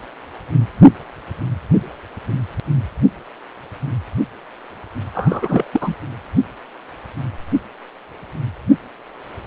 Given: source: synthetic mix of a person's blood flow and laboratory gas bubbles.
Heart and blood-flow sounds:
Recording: Doppler ultrasound of blood flow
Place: precordium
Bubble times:
5.14-5.68 s: bubbles
5.72-5.95 s: bubbles
From the record:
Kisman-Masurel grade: 212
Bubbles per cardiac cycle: several, 3 to 8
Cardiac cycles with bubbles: 1 to 10%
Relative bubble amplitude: moderate (0.250 to 0.450)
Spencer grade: 1 (occasional bubble signal discernible with the cardiac motion signal, with majority of cardiac periods free of bubbles)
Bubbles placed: anywhere in the cardiac cycle

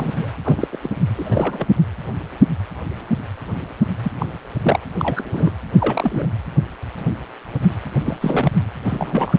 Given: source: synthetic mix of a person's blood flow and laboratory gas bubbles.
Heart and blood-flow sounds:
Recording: Doppler ultrasound of blood flow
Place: precordium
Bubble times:
0.00-0.30 s: bubbles
0.44-0.68 s: bubbles
0.72-0.77 s: bubbles
0.82-0.89 s: bubbles
1.15-1.67 s: bubbles
4.03-4.12 s: bubbles
4.19-4.26 s: bubbles
4.62-4.79 s: bubbles
4.97-5.51 s: bubbles
5.79-6.29 s: bubbles
8.04-8.17 s: bubbles
8.21-8.50 s: bubbles
8.85-9.39 s: bubbles
From the record:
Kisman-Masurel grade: 232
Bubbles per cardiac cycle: several, 3 to 8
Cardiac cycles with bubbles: 50 to 99%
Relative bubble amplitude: moderate (0.250 to 0.450)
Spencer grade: 3 (all of the cardiac periods contain showers or single bubble signals, but not dominating or overriding the cardiac motion signals)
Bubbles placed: anywhere in the cardiac cycle

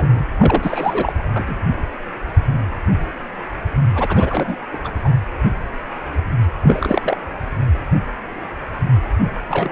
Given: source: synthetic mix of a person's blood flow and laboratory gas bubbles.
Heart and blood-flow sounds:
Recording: Doppler ultrasound of blood flow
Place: precordium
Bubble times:
0.00-0.07 s: bubbles
0.13-0.26 s: bubbles
0.36-1.13 s: bubbles
1.34-1.55 s: bubbles
3.94-4.57 s: bubbles
4.73-4.78 s: bubbles
4.84-4.91 s: bubbles
5.04-5.10 s: bubbles
6.62-7.17 s: bubbles
9.48-9.72 s: bubbles
From the record:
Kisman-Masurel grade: 332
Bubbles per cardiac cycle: rolling drumbeat, 9 or more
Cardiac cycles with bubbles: 50 to 99%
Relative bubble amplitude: moderate (0.250 to 0.450)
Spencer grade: 3 (all of the cardiac periods contain showers or single bubble signals, but not dominating or overriding the cardiac motion signals)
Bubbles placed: anywhere in the cardiac cycle

